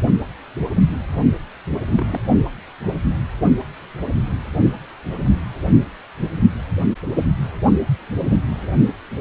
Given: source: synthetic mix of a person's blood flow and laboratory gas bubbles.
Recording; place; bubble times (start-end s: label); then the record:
Doppler ultrasound of blood flow; precordium
1.88-2.20 s: bubbles
8.30-8.37 s: bubbles
From the record:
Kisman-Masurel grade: 121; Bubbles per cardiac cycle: 1 to 2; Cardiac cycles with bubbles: 10 to 50%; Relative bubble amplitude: barely perceptible (0.100 to 0.250); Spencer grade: 2 (many but less than half of the cardiac periods contain bubble signals, singularly or in groups); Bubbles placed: only in the low amplitude regions of the cardiac cycle